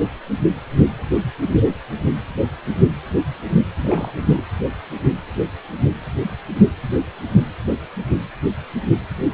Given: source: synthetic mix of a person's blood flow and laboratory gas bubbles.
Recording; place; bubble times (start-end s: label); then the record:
Doppler ultrasound of blood flow; precordium
3.76-4.12 s: bubbles
4.26-4.42 s: bubbles
From the record:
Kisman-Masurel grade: 211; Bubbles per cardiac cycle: several, 3 to 8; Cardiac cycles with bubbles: 1 to 10%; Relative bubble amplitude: barely perceptible (0.100 to 0.250); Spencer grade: 1 (occasional bubble signal discernible with the cardiac motion signal, with majority of cardiac periods free of bubbles); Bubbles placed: anywhere in the cardiac cycle